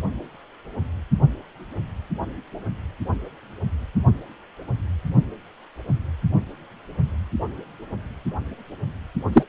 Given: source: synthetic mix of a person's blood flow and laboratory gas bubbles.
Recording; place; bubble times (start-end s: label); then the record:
Doppler ultrasound of blood flow; precordium
9.32-9.43 s: bubbles
From the record:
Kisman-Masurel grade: 113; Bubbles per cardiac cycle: 1 to 2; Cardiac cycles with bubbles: 1 to 10%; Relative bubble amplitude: loud (0.450 to 0.775); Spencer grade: 1 (occasional bubble signal discernible with the cardiac motion signal, with majority of cardiac periods free of bubbles); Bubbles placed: only in the low amplitude regions of the cardiac cycle